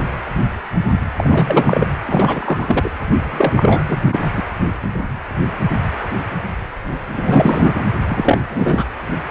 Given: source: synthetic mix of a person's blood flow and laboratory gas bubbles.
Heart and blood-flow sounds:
Doppler ultrasound of blood flow; precordium
1.17-1.86 s: bubbles
2.06-2.89 s: bubbles
3.32-3.82 s: bubbles
3.88-3.98 s: bubbles
4.12-4.33 s: bubbles
4.37-4.43 s: bubbles
7.12-7.84 s: bubbles
8.05-8.40 s: bubbles
8.50-8.84 s: bubbles
From the record:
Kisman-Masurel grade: 333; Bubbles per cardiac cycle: rolling drumbeat, 9 or more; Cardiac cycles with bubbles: 50 to 99%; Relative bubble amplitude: loud (0.450 to 0.775); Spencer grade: 3 (all of the cardiac periods contain showers or single bubble signals, but not dominating or overriding the cardiac motion signals); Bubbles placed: anywhere in the cardiac cycle

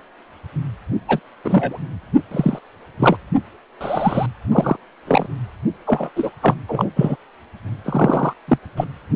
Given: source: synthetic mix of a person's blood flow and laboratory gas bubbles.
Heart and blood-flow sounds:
Doppler ultrasound of blood flow; precordium
1.08-1.20 s: bubbles
1.44-1.80 s: bubbles
2.31-2.59 s: bubbles
2.99-3.17 s: bubbles
3.80-4.26 s: bubbles
4.51-4.76 s: bubbles
5.07-5.26 s: bubbles
5.87-6.09 s: bubbles
6.16-6.30 s: bubbles
6.42-6.54 s: bubbles
6.68-6.89 s: bubbles
6.96-7.17 s: bubbles
7.85-8.33 s: bubbles
8.47-8.58 s: bubbles
8.76-8.85 s: bubbles
From the record:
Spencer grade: 3 (all of the cardiac periods contain showers or single bubble signals, but not dominating or overriding the cardiac motion signals); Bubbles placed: only in the low amplitude regions of the cardiac cycle

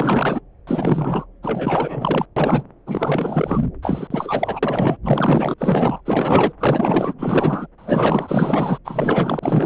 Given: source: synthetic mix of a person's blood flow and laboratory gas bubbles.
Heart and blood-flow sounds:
Doppler ultrasound of blood flow; subclavian vein
0.00-0.41 s: bubbles
0.67-1.25 s: bubbles
1.43-2.26 s: bubbles
2.36-2.63 s: bubbles
2.86-3.64 s: bubbles
3.82-4.07 s: bubbles
4.10-4.60 s: bubbles
4.62-4.97 s: bubbles
5.04-5.54 s: bubbles
5.58-6.01 s: bubbles
6.05-6.52 s: bubbles
6.59-7.14 s: bubbles
7.18-7.67 s: bubbles
7.78-8.78 s: bubbles
8.84-9.66 s: bubbles
From the record:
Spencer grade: 4 (maximum detectable bubble signal sounding continuously throughout systole and diastole of every cardiac period, and overriding the amplitude of the normal cardiac signals); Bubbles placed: anywhere in the cardiac cycle

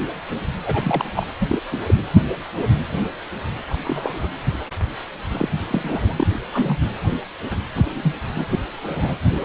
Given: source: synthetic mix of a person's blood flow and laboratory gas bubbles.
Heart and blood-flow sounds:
Doppler ultrasound of blood flow; precordium
0.63-1.04 s: bubbles
1.15-1.27 s: bubbles
1.40-1.60 s: bubbles
1.71-1.80 s: bubbles
1.86-1.94 s: bubbles
1.98-2.06 s: bubbles
3.67-4.28 s: bubbles
5.31-5.49 s: bubbles
5.71-6.27 s: bubbles
6.53-6.81 s: bubbles
7.75-8.15 s: bubbles
8.36-8.46 s: bubbles
8.49-8.59 s: bubbles
8.82-9.17 s: bubbles
From the record:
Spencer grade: 3 (all of the cardiac periods contain showers or single bubble signals, but not dominating or overriding the cardiac motion signals); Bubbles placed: anywhere in the cardiac cycle

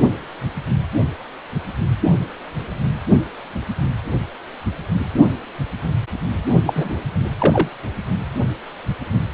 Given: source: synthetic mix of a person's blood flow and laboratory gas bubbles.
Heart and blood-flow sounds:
Doppler ultrasound of blood flow; precordium
6.67-7.00 s: bubbles
7.38-7.68 s: bubbles
From the record:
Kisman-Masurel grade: 213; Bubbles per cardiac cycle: several, 3 to 8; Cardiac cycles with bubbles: 1 to 10%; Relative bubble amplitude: loud (0.450 to 0.775); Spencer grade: 1 (occasional bubble signal discernible with the cardiac motion signal, with majority of cardiac periods free of bubbles); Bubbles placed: only in the low amplitude regions of the cardiac cycle

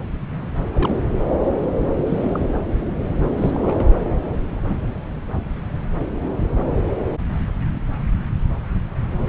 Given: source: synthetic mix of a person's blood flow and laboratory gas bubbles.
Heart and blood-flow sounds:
Doppler ultrasound of blood flow; subclavian vein
0.74-1.01 s: bubbles
1.97-2.46 s: bubbles
3.33-3.84 s: bubbles
From the record:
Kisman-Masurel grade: 221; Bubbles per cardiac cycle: several, 3 to 8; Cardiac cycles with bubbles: 10 to 50%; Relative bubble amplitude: barely perceptible (0.100 to 0.250); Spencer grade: 2 (many but less than half of the cardiac periods contain bubble signals, singularly or in groups); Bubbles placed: anywhere in the cardiac cycle

